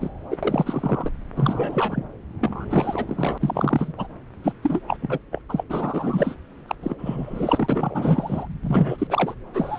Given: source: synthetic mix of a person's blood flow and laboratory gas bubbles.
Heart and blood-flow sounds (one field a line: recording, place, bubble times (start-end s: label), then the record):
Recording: Doppler ultrasound of blood flow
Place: subclavian vein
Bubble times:
0.00-0.10 s: bubbles
0.30-0.36 s: bubbles
0.42-1.09 s: bubbles
1.35-2.08 s: bubbles
2.41-2.65 s: bubbles
2.70-3.38 s: bubbles
3.41-3.92 s: bubbles
3.97-4.08 s: bubbles
4.43-4.53 s: bubbles
4.63-4.80 s: bubbles
4.87-4.97 s: bubbles
5.02-5.19 s: bubbles
5.32-5.42 s: bubbles
5.49-5.64 s: bubbles
5.69-6.35 s: bubbles
6.69-6.75 s: bubbles
6.83-6.95 s: bubbles
6.99-8.46 s: bubbles
8.63-9.07 s: bubbles
9.10-9.34 s: bubbles
9.53-9.79 s: bubbles
From the record:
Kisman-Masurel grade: 342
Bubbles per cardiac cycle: rolling drumbeat, 9 or more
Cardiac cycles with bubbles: 100%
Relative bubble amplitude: moderate (0.250 to 0.450)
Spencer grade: 3 (all of the cardiac periods contain showers or single bubble signals, but not dominating or overriding the cardiac motion signals)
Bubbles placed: anywhere in the cardiac cycle